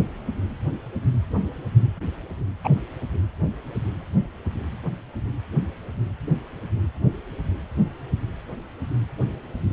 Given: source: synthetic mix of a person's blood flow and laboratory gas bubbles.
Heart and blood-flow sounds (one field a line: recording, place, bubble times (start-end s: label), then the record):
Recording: Doppler ultrasound of blood flow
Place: precordium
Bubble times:
2.64-2.70 s: bubbles
From the record:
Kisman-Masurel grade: 112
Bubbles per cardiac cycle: 1 to 2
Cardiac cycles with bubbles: 1 to 10%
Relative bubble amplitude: moderate (0.250 to 0.450)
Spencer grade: 1 (occasional bubble signal discernible with the cardiac motion signal, with majority of cardiac periods free of bubbles)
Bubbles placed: anywhere in the cardiac cycle